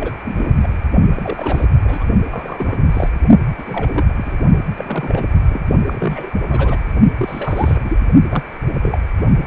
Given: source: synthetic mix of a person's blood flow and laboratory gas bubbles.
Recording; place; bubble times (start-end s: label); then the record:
Doppler ultrasound of blood flow; precordium
0.00-0.13 s: bubbles
0.24-0.52 s: bubbles
0.62-0.68 s: bubbles
1.10-1.66 s: bubbles
1.84-2.04 s: bubbles
2.30-2.87 s: bubbles
2.90-3.10 s: bubbles
3.58-4.13 s: bubbles
4.17-4.36 s: bubbles
4.77-5.26 s: bubbles
5.50-5.61 s: bubbles
5.86-6.33 s: bubbles
6.50-6.78 s: bubbles
7.17-7.79 s: bubbles
7.85-8.01 s: bubbles
8.30-8.44 s: bubbles
8.81-8.98 s: bubbles
From the record:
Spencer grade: 3 (all of the cardiac periods contain showers or single bubble signals, but not dominating or overriding the cardiac motion signals); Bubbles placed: only in the low amplitude regions of the cardiac cycle